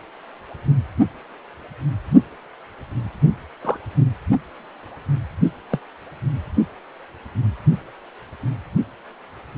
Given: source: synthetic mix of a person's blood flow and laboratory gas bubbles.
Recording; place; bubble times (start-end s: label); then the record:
Doppler ultrasound of blood flow; precordium
3.62-3.77 s: bubbles
5.71-5.79 s: bubbles
From the record:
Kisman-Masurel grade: 122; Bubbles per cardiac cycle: 1 to 2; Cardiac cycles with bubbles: 10 to 50%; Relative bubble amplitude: moderate (0.250 to 0.450); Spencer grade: 2 (many but less than half of the cardiac periods contain bubble signals, singularly or in groups); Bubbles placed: only in the low amplitude regions of the cardiac cycle